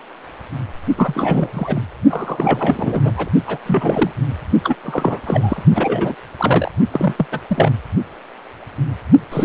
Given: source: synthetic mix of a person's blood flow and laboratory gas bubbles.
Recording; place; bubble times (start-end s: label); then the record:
Doppler ultrasound of blood flow; precordium
0.96-1.82 s: bubbles
2.09-3.13 s: bubbles
3.17-3.30 s: bubbles
3.46-3.58 s: bubbles
3.65-4.11 s: bubbles
4.63-4.76 s: bubbles
4.85-5.21 s: bubbles
5.26-5.62 s: bubbles
5.75-6.15 s: bubbles
6.38-6.70 s: bubbles
6.92-7.14 s: bubbles
7.18-7.26 s: bubbles
7.32-7.41 s: bubbles
7.50-7.72 s: bubbles
9.31-9.45 s: bubbles
From the record:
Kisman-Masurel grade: 332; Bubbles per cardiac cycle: rolling drumbeat, 9 or more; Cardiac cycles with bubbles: 50 to 99%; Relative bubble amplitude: moderate (0.250 to 0.450); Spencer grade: 3 (all of the cardiac periods contain showers or single bubble signals, but not dominating or overriding the cardiac motion signals); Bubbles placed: only in the low amplitude regions of the cardiac cycle